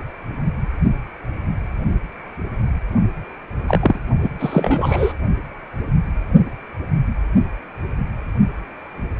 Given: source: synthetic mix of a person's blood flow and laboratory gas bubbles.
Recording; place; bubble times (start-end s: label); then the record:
Doppler ultrasound of blood flow; precordium
3.68-3.99 s: bubbles
4.22-4.30 s: bubbles
4.39-5.13 s: bubbles
From the record:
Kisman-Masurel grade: 222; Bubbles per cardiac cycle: several, 3 to 8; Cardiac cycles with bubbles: 10 to 50%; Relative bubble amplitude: moderate (0.250 to 0.450); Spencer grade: 2 (many but less than half of the cardiac periods contain bubble signals, singularly or in groups); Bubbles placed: only in the low amplitude regions of the cardiac cycle